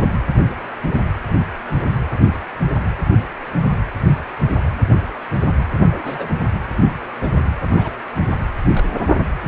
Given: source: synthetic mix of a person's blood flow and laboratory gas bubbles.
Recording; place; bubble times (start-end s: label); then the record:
Doppler ultrasound of blood flow; precordium
0.46-0.52 s: bubbles
5.82-6.29 s: bubbles
7.21-7.29 s: bubbles
7.74-7.96 s: bubbles
8.73-8.85 s: bubbles
9.09-9.26 s: bubbles
From the record:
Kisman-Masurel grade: 121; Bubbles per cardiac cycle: 1 to 2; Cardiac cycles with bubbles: 10 to 50%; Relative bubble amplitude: barely perceptible (0.100 to 0.250); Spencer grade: 2 (many but less than half of the cardiac periods contain bubble signals, singularly or in groups); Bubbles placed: anywhere in the cardiac cycle